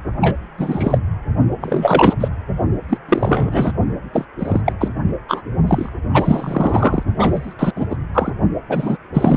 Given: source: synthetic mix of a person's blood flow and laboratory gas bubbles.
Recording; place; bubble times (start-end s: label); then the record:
Doppler ultrasound of blood flow; precordium
0.21-0.38 s: bubbles
0.58-0.98 s: bubbles
1.60-2.14 s: bubbles
2.20-2.28 s: bubbles
2.89-2.98 s: bubbles
3.08-3.73 s: bubbles
4.12-4.25 s: bubbles
4.39-4.60 s: bubbles
4.65-4.73 s: bubbles
4.80-4.88 s: bubbles
5.28-5.41 s: bubbles
5.67-5.89 s: bubbles
6.13-7.03 s: bubbles
7.18-7.54 s: bubbles
7.59-7.72 s: bubbles
7.75-7.86 s: bubbles
7.89-7.96 s: bubbles
8.14-8.31 s: bubbles
8.69-8.97 s: bubbles
9.13-9.37 s: bubbles
From the record:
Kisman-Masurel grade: 243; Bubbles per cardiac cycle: several, 3 to 8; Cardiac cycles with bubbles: 100%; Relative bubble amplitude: loud (0.450 to 0.775); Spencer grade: 3 (all of the cardiac periods contain showers or single bubble signals, but not dominating or overriding the cardiac motion signals); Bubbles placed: only in the low amplitude regions of the cardiac cycle